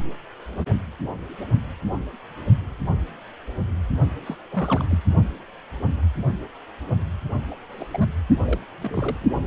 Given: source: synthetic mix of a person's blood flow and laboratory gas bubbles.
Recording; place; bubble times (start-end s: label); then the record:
Doppler ultrasound of blood flow; precordium
4.26-4.37 s: bubbles
4.51-4.85 s: bubbles
4.90-4.98 s: bubbles
7.50-7.55 s: bubbles
7.72-8.08 s: bubbles
8.45-8.58 s: bubbles
8.80-9.17 s: bubbles
9.21-9.28 s: bubbles
From the record:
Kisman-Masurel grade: 221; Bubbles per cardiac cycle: several, 3 to 8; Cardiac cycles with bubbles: 10 to 50%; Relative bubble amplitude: barely perceptible (0.100 to 0.250); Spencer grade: 2 (many but less than half of the cardiac periods contain bubble signals, singularly or in groups); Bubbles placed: only in the low amplitude regions of the cardiac cycle